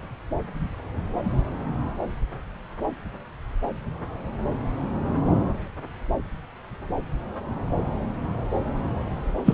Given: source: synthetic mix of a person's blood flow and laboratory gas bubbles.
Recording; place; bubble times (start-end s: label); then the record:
Doppler ultrasound of blood flow; subclavian vein
9.45-9.53 s: bubbles
From the record:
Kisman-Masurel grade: 113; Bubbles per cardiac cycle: 1 to 2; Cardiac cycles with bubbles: 1 to 10%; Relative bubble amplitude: loud (0.450 to 0.775); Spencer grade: 1 (occasional bubble signal discernible with the cardiac motion signal, with majority of cardiac periods free of bubbles); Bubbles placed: anywhere in the cardiac cycle